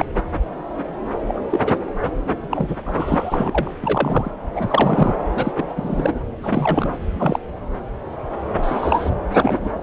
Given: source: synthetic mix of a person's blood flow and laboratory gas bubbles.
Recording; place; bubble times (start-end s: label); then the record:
Doppler ultrasound of blood flow; subclavian vein
0.00-0.05 s: bubbles
1.28-1.42 s: bubbles
1.50-1.59 s: bubbles
1.64-1.75 s: bubbles
2.51-2.77 s: bubbles
2.85-3.71 s: bubbles
3.82-4.31 s: bubbles
4.55-5.14 s: bubbles
5.36-5.52 s: bubbles
5.57-5.74 s: bubbles
5.76-6.20 s: bubbles
6.42-6.92 s: bubbles
7.19-7.40 s: bubbles
8.58-9.11 s: bubbles
9.33-9.70 s: bubbles
From the record:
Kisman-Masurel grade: 232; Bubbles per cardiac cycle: several, 3 to 8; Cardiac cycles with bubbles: 50 to 99%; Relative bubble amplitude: moderate (0.250 to 0.450); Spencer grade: 3 (all of the cardiac periods contain showers or single bubble signals, but not dominating or overriding the cardiac motion signals); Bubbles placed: anywhere in the cardiac cycle